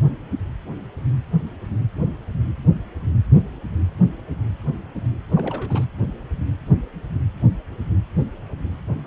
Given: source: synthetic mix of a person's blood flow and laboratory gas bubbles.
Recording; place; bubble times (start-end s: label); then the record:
Doppler ultrasound of blood flow; precordium
5.29-5.84 s: bubbles
From the record:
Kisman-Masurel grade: 211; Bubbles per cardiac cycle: several, 3 to 8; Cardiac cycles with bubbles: 1 to 10%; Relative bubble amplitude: barely perceptible (0.100 to 0.250); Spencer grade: 1 (occasional bubble signal discernible with the cardiac motion signal, with majority of cardiac periods free of bubbles); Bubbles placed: anywhere in the cardiac cycle